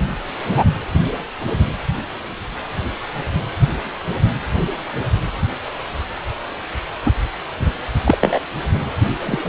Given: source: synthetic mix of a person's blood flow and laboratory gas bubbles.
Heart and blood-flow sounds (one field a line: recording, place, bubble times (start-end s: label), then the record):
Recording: Doppler ultrasound of blood flow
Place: precordium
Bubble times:
0.54-0.64 s: bubbles
7.05-7.11 s: bubbles
7.57-7.71 s: bubbles
8.04-8.18 s: bubbles
8.21-8.39 s: bubbles
9.19-9.49 s: bubbles
From the record:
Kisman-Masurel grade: 123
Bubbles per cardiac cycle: 1 to 2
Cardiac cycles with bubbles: 10 to 50%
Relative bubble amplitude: loud (0.450 to 0.775)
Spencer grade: 2 (many but less than half of the cardiac periods contain bubble signals, singularly or in groups)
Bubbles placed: anywhere in the cardiac cycle